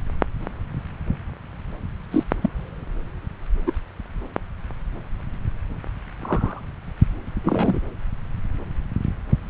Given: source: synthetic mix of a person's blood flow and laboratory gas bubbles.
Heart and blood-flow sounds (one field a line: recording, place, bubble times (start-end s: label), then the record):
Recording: Doppler ultrasound of blood flow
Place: subclavian vein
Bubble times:
2.11-2.23 s: bubbles
2.42-2.49 s: bubbles
3.67-3.71 s: bubbles
6.21-6.60 s: bubbles
7.43-7.79 s: bubbles
From the record:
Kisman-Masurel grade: 122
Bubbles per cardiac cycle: 1 to 2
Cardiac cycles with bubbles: 10 to 50%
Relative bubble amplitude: moderate (0.250 to 0.450)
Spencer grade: 2 (many but less than half of the cardiac periods contain bubble signals, singularly or in groups)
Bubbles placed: anywhere in the cardiac cycle